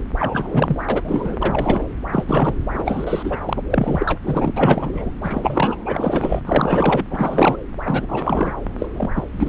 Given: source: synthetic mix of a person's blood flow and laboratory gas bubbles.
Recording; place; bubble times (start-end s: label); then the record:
Doppler ultrasound of blood flow; subclavian vein
0.00-0.02 s: bubbles
0.18-0.85 s: bubbles
0.88-1.03 s: bubbles
1.05-1.38 s: bubbles
1.42-1.87 s: bubbles
2.12-2.54 s: bubbles
2.73-3.38 s: bubbles
3.44-3.62 s: bubbles
3.70-4.20 s: bubbles
4.25-4.51 s: bubbles
4.55-5.11 s: bubbles
5.21-5.75 s: bubbles
5.85-6.41 s: bubbles
6.45-7.04 s: bubbles
7.11-7.57 s: bubbles
7.84-8.53 s: bubbles
8.79-8.87 s: bubbles
8.93-9.09 s: bubbles
9.15-9.49 s: bubbles
From the record:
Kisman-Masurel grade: 343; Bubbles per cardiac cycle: rolling drumbeat, 9 or more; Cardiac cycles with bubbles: 100%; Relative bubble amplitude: loud (0.450 to 0.775); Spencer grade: 3 (all of the cardiac periods contain showers or single bubble signals, but not dominating or overriding the cardiac motion signals); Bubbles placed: anywhere in the cardiac cycle